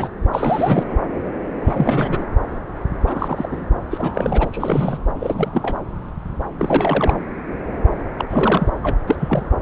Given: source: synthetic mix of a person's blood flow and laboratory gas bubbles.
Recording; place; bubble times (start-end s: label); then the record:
Doppler ultrasound of blood flow; subclavian vein
0.00-0.09 s: bubbles
0.31-0.95 s: bubbles
1.65-2.25 s: bubbles
3.06-3.66 s: bubbles
3.90-4.50 s: bubbles
4.52-4.98 s: bubbles
5.20-5.77 s: bubbles
6.58-7.18 s: bubbles
8.18-8.25 s: bubbles
8.29-8.69 s: bubbles
8.83-8.96 s: bubbles
9.07-9.16 s: bubbles
9.20-9.50 s: bubbles
From the record:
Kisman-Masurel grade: 332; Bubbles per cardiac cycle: rolling drumbeat, 9 or more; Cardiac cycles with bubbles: 50 to 99%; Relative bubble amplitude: moderate (0.250 to 0.450); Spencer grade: 3 (all of the cardiac periods contain showers or single bubble signals, but not dominating or overriding the cardiac motion signals); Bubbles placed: anywhere in the cardiac cycle